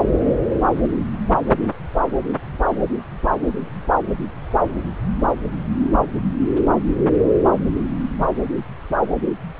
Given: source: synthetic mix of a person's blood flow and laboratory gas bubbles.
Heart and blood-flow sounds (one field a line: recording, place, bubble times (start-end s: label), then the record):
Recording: Doppler ultrasound of blood flow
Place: subclavian vein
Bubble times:
no bubbles
From the record:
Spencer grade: 0 (complete lack of bubble signals)